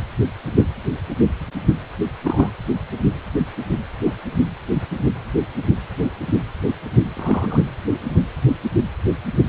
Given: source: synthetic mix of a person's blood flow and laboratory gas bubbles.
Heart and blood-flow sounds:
Doppler ultrasound of blood flow; precordium
0.56-0.67 s: bubbles
2.24-2.50 s: bubbles
4.06-4.15 s: bubbles
4.74-4.83 s: bubbles
7.15-7.66 s: bubbles
From the record:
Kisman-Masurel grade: 122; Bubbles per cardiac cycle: 1 to 2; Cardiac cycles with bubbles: 10 to 50%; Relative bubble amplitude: moderate (0.250 to 0.450); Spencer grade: 2 (many but less than half of the cardiac periods contain bubble signals, singularly or in groups); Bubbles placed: anywhere in the cardiac cycle

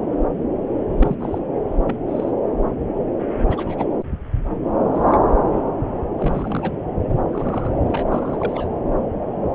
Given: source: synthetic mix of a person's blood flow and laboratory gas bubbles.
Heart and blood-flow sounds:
Doppler ultrasound of blood flow; subclavian vein
0.99-1.15 s: bubbles
1.20-1.39 s: bubbles
1.87-1.95 s: bubbles
2.07-2.31 s: bubbles
3.49-3.86 s: bubbles
4.94-5.04 s: bubbles
5.07-5.18 s: bubbles
6.19-6.78 s: bubbles
7.33-7.72 s: bubbles
7.87-8.04 s: bubbles
8.09-8.69 s: bubbles
From the record:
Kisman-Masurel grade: 221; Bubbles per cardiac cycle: several, 3 to 8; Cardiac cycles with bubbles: 10 to 50%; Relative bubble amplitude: barely perceptible (0.100 to 0.250); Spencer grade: 2 (many but less than half of the cardiac periods contain bubble signals, singularly or in groups); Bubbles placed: anywhere in the cardiac cycle

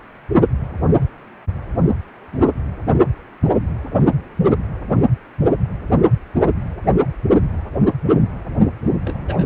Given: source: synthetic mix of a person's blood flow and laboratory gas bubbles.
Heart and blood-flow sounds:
Doppler ultrasound of blood flow; precordium
2.32-2.49 s: bubbles
9.05-9.45 s: bubbles
From the record:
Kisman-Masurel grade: 111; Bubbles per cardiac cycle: 1 to 2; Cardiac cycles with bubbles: 1 to 10%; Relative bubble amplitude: barely perceptible (0.100 to 0.250); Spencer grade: 1 (occasional bubble signal discernible with the cardiac motion signal, with majority of cardiac periods free of bubbles); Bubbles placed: anywhere in the cardiac cycle

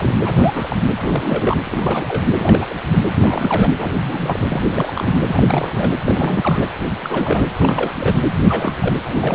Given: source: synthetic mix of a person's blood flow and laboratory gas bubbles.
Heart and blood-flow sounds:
Doppler ultrasound of blood flow; precordium
0.00-0.15 s: bubbles
0.21-0.76 s: bubbles
1.00-1.57 s: bubbles
1.64-2.05 s: bubbles
2.08-2.25 s: bubbles
2.37-2.75 s: bubbles
2.92-3.04 s: bubbles
3.15-3.70 s: bubbles
3.78-4.38 s: bubbles
4.48-5.20 s: bubbles
5.26-5.43 s: bubbles
5.46-5.95 s: bubbles
6.04-6.69 s: bubbles
7.01-7.46 s: bubbles
7.59-7.93 s: bubbles
7.96-8.22 s: bubbles
8.46-8.95 s: bubbles
9.03-9.35 s: bubbles
From the record:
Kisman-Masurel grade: 342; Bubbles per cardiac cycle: rolling drumbeat, 9 or more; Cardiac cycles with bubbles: 100%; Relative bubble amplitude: moderate (0.250 to 0.450); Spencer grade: 3 (all of the cardiac periods contain showers or single bubble signals, but not dominating or overriding the cardiac motion signals); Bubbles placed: anywhere in the cardiac cycle

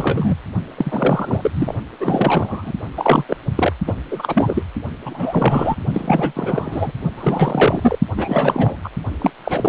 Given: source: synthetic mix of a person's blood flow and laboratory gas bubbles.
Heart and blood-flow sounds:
Doppler ultrasound of blood flow; precordium
0.00-0.36 s: bubbles
0.76-1.51 s: bubbles
1.53-1.74 s: bubbles
1.99-2.73 s: bubbles
2.97-3.25 s: bubbles
3.28-3.37 s: bubbles
3.56-3.73 s: bubbles
3.87-3.94 s: bubbles
4.11-4.63 s: bubbles
5.05-5.75 s: bubbles
5.94-6.92 s: bubbles
7.17-7.99 s: bubbles
8.16-8.77 s: bubbles
8.83-8.88 s: bubbles
9.19-9.30 s: bubbles
9.44-9.69 s: bubbles
From the record:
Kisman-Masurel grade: 343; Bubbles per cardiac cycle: rolling drumbeat, 9 or more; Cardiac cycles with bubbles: 100%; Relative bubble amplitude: loud (0.450 to 0.775); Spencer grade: 3 (all of the cardiac periods contain showers or single bubble signals, but not dominating or overriding the cardiac motion signals); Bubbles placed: only in the low amplitude regions of the cardiac cycle

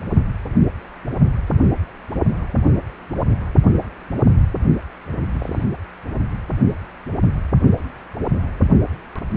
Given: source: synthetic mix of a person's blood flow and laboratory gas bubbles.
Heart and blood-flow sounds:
Doppler ultrasound of blood flow; precordium
5.33-5.64 s: bubbles
From the record:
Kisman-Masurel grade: 111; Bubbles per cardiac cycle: 1 to 2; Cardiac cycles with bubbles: 1 to 10%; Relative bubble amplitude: barely perceptible (0.100 to 0.250); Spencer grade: 1 (occasional bubble signal discernible with the cardiac motion signal, with majority of cardiac periods free of bubbles); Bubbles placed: only in the low amplitude regions of the cardiac cycle

